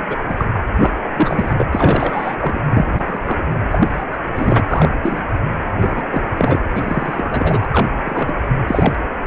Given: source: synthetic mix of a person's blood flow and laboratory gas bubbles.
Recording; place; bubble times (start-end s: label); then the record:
Doppler ultrasound of blood flow; precordium
0.09-0.17 s: bubbles
0.29-0.34 s: bubbles
0.38-0.46 s: bubbles
0.76-0.93 s: bubbles
1.15-1.54 s: bubbles
1.58-1.66 s: bubbles
1.72-2.35 s: bubbles
2.40-2.60 s: bubbles
2.71-3.43 s: bubbles
3.71-4.05 s: bubbles
4.12-4.18 s: bubbles
4.36-4.62 s: bubbles
4.69-4.89 s: bubbles
5.03-5.21 s: bubbles
5.80-6.04 s: bubbles
6.11-6.22 s: bubbles
6.38-6.59 s: bubbles
6.75-7.65 s: bubbles
7.71-7.90 s: bubbles
8.03-8.34 s: bubbles
8.66-8.95 s: bubbles
From the record:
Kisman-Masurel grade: 242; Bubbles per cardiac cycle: several, 3 to 8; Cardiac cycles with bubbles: 100%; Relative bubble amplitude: moderate (0.250 to 0.450); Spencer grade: 3 (all of the cardiac periods contain showers or single bubble signals, but not dominating or overriding the cardiac motion signals); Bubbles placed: anywhere in the cardiac cycle